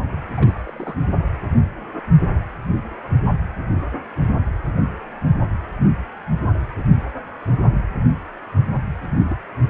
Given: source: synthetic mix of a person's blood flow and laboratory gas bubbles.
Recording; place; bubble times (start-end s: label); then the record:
Doppler ultrasound of blood flow; precordium
0.36-0.96 s: bubbles
9.11-9.35 s: bubbles
9.66-9.70 s: bubbles
From the record:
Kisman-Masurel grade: 221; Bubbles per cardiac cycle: several, 3 to 8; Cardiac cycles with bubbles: 10 to 50%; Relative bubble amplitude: barely perceptible (0.100 to 0.250); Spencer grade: 2 (many but less than half of the cardiac periods contain bubble signals, singularly or in groups); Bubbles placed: anywhere in the cardiac cycle